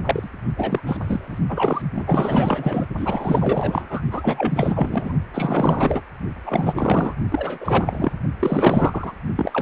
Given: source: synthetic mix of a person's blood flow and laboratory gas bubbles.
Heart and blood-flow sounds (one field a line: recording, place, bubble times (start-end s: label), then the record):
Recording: Doppler ultrasound of blood flow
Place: precordium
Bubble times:
0.05-0.28 s: bubbles
0.56-0.80 s: bubbles
0.85-1.39 s: bubbles
1.49-1.82 s: bubbles
1.95-2.86 s: bubbles
2.97-4.01 s: bubbles
4.11-5.13 s: bubbles
5.33-6.01 s: bubbles
6.45-7.14 s: bubbles
7.30-8.12 s: bubbles
8.39-9.15 s: bubbles
9.36-9.62 s: bubbles
From the record:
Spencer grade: 4 (maximum detectable bubble signal sounding continuously throughout systole and diastole of every cardiac period, and overriding the amplitude of the normal cardiac signals)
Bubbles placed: only in the low amplitude regions of the cardiac cycle